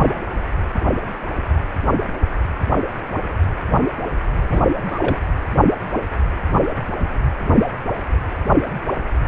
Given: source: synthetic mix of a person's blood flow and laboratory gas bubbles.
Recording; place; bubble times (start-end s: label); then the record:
Doppler ultrasound of blood flow; precordium
4.50-4.64 s: bubbles
4.88-5.17 s: bubbles
From the record:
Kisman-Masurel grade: 212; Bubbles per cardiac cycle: several, 3 to 8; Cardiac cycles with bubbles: 1 to 10%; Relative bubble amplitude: moderate (0.250 to 0.450); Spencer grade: 1 (occasional bubble signal discernible with the cardiac motion signal, with majority of cardiac periods free of bubbles); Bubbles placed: anywhere in the cardiac cycle